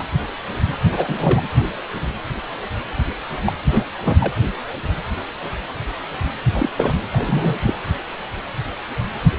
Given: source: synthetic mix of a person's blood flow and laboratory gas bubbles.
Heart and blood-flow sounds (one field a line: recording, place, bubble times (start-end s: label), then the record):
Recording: Doppler ultrasound of blood flow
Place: precordium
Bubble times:
0.00-0.06 s: bubbles
0.96-1.41 s: bubbles
3.46-3.53 s: bubbles
3.71-3.84 s: bubbles
4.05-4.33 s: bubbles
6.54-6.70 s: bubbles
6.76-6.94 s: bubbles
7.12-7.56 s: bubbles
7.62-7.74 s: bubbles
From the record:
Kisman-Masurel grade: 222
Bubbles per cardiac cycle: several, 3 to 8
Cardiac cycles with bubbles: 10 to 50%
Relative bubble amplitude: moderate (0.250 to 0.450)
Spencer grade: 2 (many but less than half of the cardiac periods contain bubble signals, singularly or in groups)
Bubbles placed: anywhere in the cardiac cycle